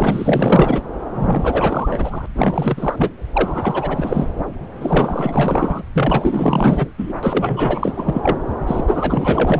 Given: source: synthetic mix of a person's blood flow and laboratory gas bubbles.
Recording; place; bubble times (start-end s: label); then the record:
Doppler ultrasound of blood flow; subclavian vein
0.00-0.82 s: bubbles
1.15-2.26 s: bubbles
2.35-3.10 s: bubbles
3.33-4.27 s: bubbles
4.80-5.83 s: bubbles
5.94-6.88 s: bubbles
6.98-7.13 s: bubbles
7.22-8.38 s: bubbles
8.67-8.85 s: bubbles
8.87-9.60 s: bubbles
From the record:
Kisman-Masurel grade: 444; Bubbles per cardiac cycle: continuous sound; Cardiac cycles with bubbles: 100%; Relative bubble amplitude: maximal (0.775 to 0.999); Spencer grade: 4 (maximum detectable bubble signal sounding continuously throughout systole and diastole of every cardiac period, and overriding the amplitude of the normal cardiac signals); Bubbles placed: anywhere in the cardiac cycle